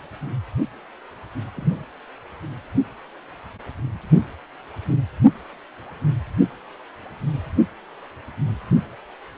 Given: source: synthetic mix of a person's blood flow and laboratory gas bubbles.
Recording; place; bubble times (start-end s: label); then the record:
Doppler ultrasound of blood flow; precordium
1.55-1.84 s: bubbles
From the record:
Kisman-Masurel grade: 121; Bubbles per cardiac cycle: 1 to 2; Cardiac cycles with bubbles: 10 to 50%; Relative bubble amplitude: barely perceptible (0.100 to 0.250); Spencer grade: 2 (many but less than half of the cardiac periods contain bubble signals, singularly or in groups); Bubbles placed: only in the low amplitude regions of the cardiac cycle